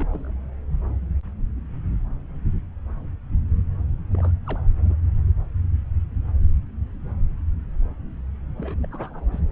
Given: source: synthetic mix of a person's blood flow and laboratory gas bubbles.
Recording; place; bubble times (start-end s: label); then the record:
Doppler ultrasound of blood flow; subclavian vein
0.00-0.04 s: bubbles
0.10-0.31 s: bubbles
4.10-4.31 s: bubbles
4.45-4.58 s: bubbles
4.81-4.95 s: bubbles
8.57-8.87 s: bubbles
8.90-9.40 s: bubbles
From the record:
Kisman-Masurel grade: 221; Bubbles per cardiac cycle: several, 3 to 8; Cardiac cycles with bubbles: 10 to 50%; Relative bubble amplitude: barely perceptible (0.100 to 0.250); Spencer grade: 2 (many but less than half of the cardiac periods contain bubble signals, singularly or in groups); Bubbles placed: anywhere in the cardiac cycle